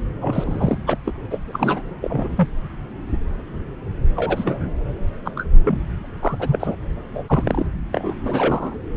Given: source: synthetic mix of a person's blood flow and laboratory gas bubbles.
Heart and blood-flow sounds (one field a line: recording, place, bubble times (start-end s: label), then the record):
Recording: Doppler ultrasound of blood flow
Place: subclavian vein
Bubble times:
0.21-0.78 s: bubbles
0.86-0.98 s: bubbles
1.05-1.13 s: bubbles
1.30-1.39 s: bubbles
1.46-1.81 s: bubbles
2.02-2.48 s: bubbles
4.16-4.71 s: bubbles
5.25-5.31 s: bubbles
5.36-5.44 s: bubbles
5.64-5.79 s: bubbles
6.04-6.07 s: bubbles
6.21-6.75 s: bubbles
7.14-7.24 s: bubbles
7.27-7.66 s: bubbles
7.93-8.14 s: bubbles
8.23-8.78 s: bubbles
From the record:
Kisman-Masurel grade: 232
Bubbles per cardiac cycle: several, 3 to 8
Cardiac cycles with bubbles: 50 to 99%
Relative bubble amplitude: moderate (0.250 to 0.450)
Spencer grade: 3 (all of the cardiac periods contain showers or single bubble signals, but not dominating or overriding the cardiac motion signals)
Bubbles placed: anywhere in the cardiac cycle